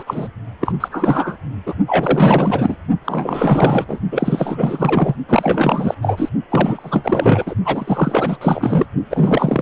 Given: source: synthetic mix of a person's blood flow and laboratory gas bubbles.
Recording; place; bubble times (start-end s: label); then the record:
Doppler ultrasound of blood flow; precordium
0.00-0.03 s: bubbles
0.06-0.29 s: bubbles
0.60-0.72 s: bubbles
0.80-0.88 s: bubbles
0.91-1.38 s: bubbles
1.66-1.74 s: bubbles
1.87-2.76 s: bubbles
3.04-3.85 s: bubbles
3.87-3.99 s: bubbles
4.12-5.16 s: bubbles
5.29-5.95 s: bubbles
6.02-6.29 s: bubbles
6.50-7.55 s: bubbles
7.65-8.38 s: bubbles
8.41-8.86 s: bubbles
9.10-9.62 s: bubbles
From the record:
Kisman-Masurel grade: 444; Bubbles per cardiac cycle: continuous sound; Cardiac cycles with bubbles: 100%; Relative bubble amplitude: maximal (0.775 to 0.999); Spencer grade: 4 (maximum detectable bubble signal sounding continuously throughout systole and diastole of every cardiac period, and overriding the amplitude of the normal cardiac signals); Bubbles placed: only in the low amplitude regions of the cardiac cycle